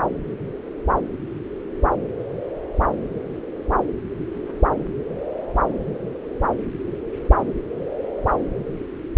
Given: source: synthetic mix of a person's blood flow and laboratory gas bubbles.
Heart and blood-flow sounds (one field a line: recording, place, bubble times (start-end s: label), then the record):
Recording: Doppler ultrasound of blood flow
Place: subclavian vein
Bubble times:
4.34-4.59 s: bubbles
4.79-4.84 s: bubbles
From the record:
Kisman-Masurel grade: 111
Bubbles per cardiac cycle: 1 to 2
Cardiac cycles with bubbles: 1 to 10%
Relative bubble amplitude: barely perceptible (0.100 to 0.250)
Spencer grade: 1 (occasional bubble signal discernible with the cardiac motion signal, with majority of cardiac periods free of bubbles)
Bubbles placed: anywhere in the cardiac cycle